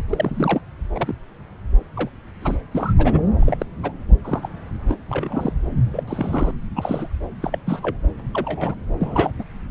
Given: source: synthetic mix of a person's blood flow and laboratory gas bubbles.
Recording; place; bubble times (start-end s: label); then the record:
Doppler ultrasound of blood flow; subclavian vein
0.00-0.04 s: bubbles
0.09-0.61 s: bubbles
0.95-1.14 s: bubbles
1.96-2.09 s: bubbles
2.42-2.56 s: bubbles
2.71-2.94 s: bubbles
2.98-3.21 s: bubbles
3.39-3.66 s: bubbles
3.83-3.92 s: bubbles
4.25-4.49 s: bubbles
4.88-4.96 s: bubbles
5.09-5.52 s: bubbles
5.93-6.03 s: bubbles
6.07-6.51 s: bubbles
6.75-7.08 s: bubbles
7.40-7.58 s: bubbles
7.66-7.96 s: bubbles
8.34-8.75 s: bubbles
9.01-9.32 s: bubbles
9.38-9.44 s: bubbles
From the record:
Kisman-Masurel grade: 242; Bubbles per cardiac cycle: several, 3 to 8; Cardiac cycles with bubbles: 100%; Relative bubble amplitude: moderate (0.250 to 0.450); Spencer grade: 3 (all of the cardiac periods contain showers or single bubble signals, but not dominating or overriding the cardiac motion signals); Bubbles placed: anywhere in the cardiac cycle